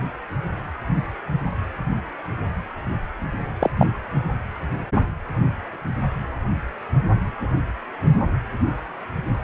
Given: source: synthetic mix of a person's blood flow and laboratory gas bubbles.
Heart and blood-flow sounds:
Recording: Doppler ultrasound of blood flow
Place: precordium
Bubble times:
3.60-3.70 s: bubbles
3.79-3.87 s: bubbles
From the record:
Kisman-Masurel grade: 113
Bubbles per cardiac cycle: 1 to 2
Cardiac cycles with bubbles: 1 to 10%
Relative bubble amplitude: loud (0.450 to 0.775)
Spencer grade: 1 (occasional bubble signal discernible with the cardiac motion signal, with majority of cardiac periods free of bubbles)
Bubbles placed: anywhere in the cardiac cycle

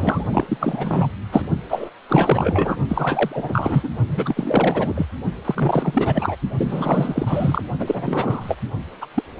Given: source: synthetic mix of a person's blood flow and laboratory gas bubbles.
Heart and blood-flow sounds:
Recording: Doppler ultrasound of blood flow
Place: precordium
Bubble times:
0.00-1.07 s: bubbles
1.31-1.46 s: bubbles
1.69-1.90 s: bubbles
2.08-2.77 s: bubbles
2.89-3.89 s: bubbles
4.08-5.07 s: bubbles
5.45-6.36 s: bubbles
6.57-7.62 s: bubbles
7.79-8.55 s: bubbles
9.01-9.06 s: bubbles
9.14-9.23 s: bubbles
From the record:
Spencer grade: 4 (maximum detectable bubble signal sounding continuously throughout systole and diastole of every cardiac period, and overriding the amplitude of the normal cardiac signals)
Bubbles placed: only in the low amplitude regions of the cardiac cycle

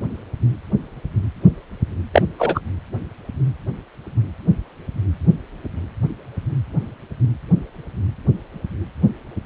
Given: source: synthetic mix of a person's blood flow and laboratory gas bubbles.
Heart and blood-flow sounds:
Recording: Doppler ultrasound of blood flow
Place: precordium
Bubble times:
2.13-2.22 s: bubbles
2.39-2.60 s: bubbles
From the record:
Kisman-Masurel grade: 213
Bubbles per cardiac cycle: several, 3 to 8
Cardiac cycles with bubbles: 1 to 10%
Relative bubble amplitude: loud (0.450 to 0.775)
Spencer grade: 1 (occasional bubble signal discernible with the cardiac motion signal, with majority of cardiac periods free of bubbles)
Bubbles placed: anywhere in the cardiac cycle

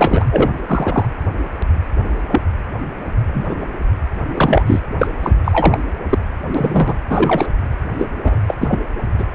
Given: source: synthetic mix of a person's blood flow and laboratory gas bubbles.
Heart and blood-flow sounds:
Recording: Doppler ultrasound of blood flow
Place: precordium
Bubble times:
0.00-0.24 s: bubbles
0.31-0.49 s: bubbles
0.67-1.05 s: bubbles
2.31-2.40 s: bubbles
3.26-3.43 s: bubbles
3.46-3.55 s: bubbles
4.34-4.63 s: bubbles
4.66-4.80 s: bubbles
4.98-5.08 s: bubbles
5.22-5.32 s: bubbles
5.44-5.80 s: bubbles
6.09-6.18 s: bubbles
6.54-6.94 s: bubbles
7.09-7.46 s: bubbles
7.98-8.07 s: bubbles
8.24-8.38 s: bubbles
8.46-8.54 s: bubbles
8.61-8.79 s: bubbles
9.19-9.26 s: bubbles
From the record:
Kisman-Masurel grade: 233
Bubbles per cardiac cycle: several, 3 to 8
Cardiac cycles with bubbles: 50 to 99%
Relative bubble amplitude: loud (0.450 to 0.775)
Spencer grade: 3 (all of the cardiac periods contain showers or single bubble signals, but not dominating or overriding the cardiac motion signals)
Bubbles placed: anywhere in the cardiac cycle

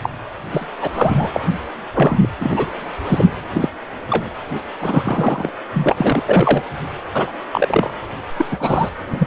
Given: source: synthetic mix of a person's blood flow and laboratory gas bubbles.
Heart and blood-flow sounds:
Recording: Doppler ultrasound of blood flow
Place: precordium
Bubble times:
0.02-0.09 s: bubbles
0.52-0.67 s: bubbles
0.81-0.88 s: bubbles
0.93-1.40 s: bubbles
1.93-2.29 s: bubbles
2.41-2.66 s: bubbles
3.07-3.33 s: bubbles
3.54-3.69 s: bubbles
4.10-4.26 s: bubbles
4.80-5.49 s: bubbles
5.74-6.23 s: bubbles
6.26-6.62 s: bubbles
7.15-7.32 s: bubbles
7.51-7.93 s: bubbles
8.37-8.46 s: bubbles
8.51-8.89 s: bubbles
9.13-9.27 s: bubbles
From the record:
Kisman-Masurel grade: 243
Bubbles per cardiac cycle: several, 3 to 8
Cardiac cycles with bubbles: 100%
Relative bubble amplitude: loud (0.450 to 0.775)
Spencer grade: 3 (all of the cardiac periods contain showers or single bubble signals, but not dominating or overriding the cardiac motion signals)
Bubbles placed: anywhere in the cardiac cycle

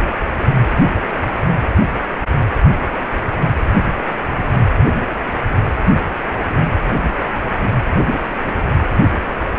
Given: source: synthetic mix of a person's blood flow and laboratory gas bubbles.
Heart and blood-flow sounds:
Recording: Doppler ultrasound of blood flow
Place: precordium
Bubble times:
no bubbles
From the record:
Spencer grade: 0 (complete lack of bubble signals)

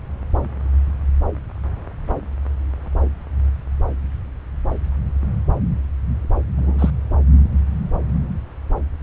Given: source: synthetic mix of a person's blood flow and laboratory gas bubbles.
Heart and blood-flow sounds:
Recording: Doppler ultrasound of blood flow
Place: subclavian vein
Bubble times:
6.56-6.90 s: bubbles
From the record:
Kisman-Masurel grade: 112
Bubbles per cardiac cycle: 1 to 2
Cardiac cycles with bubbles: 1 to 10%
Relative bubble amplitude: moderate (0.250 to 0.450)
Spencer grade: 1 (occasional bubble signal discernible with the cardiac motion signal, with majority of cardiac periods free of bubbles)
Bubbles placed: anywhere in the cardiac cycle

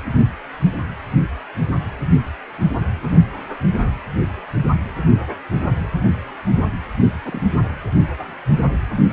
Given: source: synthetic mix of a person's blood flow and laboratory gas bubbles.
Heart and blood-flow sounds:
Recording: Doppler ultrasound of blood flow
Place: precordium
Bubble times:
7.25-7.39 s: bubbles
From the record:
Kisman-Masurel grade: 112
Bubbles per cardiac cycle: 1 to 2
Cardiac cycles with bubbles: 1 to 10%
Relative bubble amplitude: moderate (0.250 to 0.450)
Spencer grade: 1 (occasional bubble signal discernible with the cardiac motion signal, with majority of cardiac periods free of bubbles)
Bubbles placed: anywhere in the cardiac cycle

